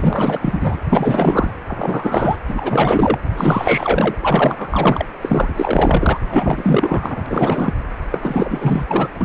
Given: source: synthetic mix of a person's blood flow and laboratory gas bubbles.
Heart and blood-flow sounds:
Doppler ultrasound of blood flow; precordium
0.00-0.78 s: bubbles
0.82-0.85 s: bubbles
0.89-1.52 s: bubbles
1.68-2.37 s: bubbles
2.48-3.18 s: bubbles
3.27-4.15 s: bubbles
4.21-5.04 s: bubbles
5.21-6.21 s: bubbles
6.28-7.22 s: bubbles
7.26-7.73 s: bubbles
8.11-9.08 s: bubbles
9.21-9.25 s: bubbles
From the record:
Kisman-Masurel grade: 444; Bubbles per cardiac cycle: continuous sound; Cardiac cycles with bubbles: 100%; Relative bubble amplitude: maximal (0.775 to 0.999); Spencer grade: 4 (maximum detectable bubble signal sounding continuously throughout systole and diastole of every cardiac period, and overriding the amplitude of the normal cardiac signals); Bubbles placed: anywhere in the cardiac cycle

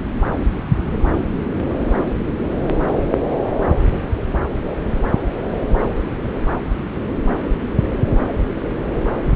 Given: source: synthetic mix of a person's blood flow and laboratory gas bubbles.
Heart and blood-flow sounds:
Doppler ultrasound of blood flow; subclavian vein
no bubbles
From the record:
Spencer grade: 0 (complete lack of bubble signals)

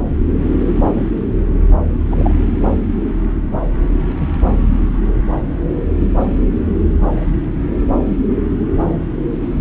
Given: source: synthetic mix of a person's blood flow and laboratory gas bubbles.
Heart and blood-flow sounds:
Doppler ultrasound of blood flow; subclavian vein
2.10-2.33 s: bubbles
4.20-4.27 s: bubbles
From the record:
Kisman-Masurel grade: 122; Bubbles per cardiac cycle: 1 to 2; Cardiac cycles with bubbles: 10 to 50%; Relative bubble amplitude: moderate (0.250 to 0.450); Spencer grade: 2 (many but less than half of the cardiac periods contain bubble signals, singularly or in groups); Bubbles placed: anywhere in the cardiac cycle

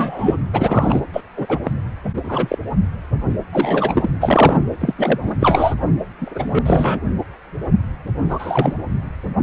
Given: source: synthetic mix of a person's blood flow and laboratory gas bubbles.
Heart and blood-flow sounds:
Doppler ultrasound of blood flow; precordium
0.00-0.36 s: bubbles
0.53-1.01 s: bubbles
1.12-1.21 s: bubbles
1.36-1.46 s: bubbles
1.49-1.59 s: bubbles
1.64-1.72 s: bubbles
2.16-2.58 s: bubbles
3.52-4.09 s: bubbles
4.20-4.59 s: bubbles
4.80-4.94 s: bubbles
4.96-5.18 s: bubbles
5.21-5.32 s: bubbles
5.39-5.75 s: bubbles
6.21-6.59 s: bubbles
6.66-7.01 s: bubbles
8.29-8.75 s: bubbles
From the record:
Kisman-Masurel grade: 233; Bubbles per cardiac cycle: several, 3 to 8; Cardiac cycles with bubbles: 50 to 99%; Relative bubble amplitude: loud (0.450 to 0.775); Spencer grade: 3 (all of the cardiac periods contain showers or single bubble signals, but not dominating or overriding the cardiac motion signals); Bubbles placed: anywhere in the cardiac cycle

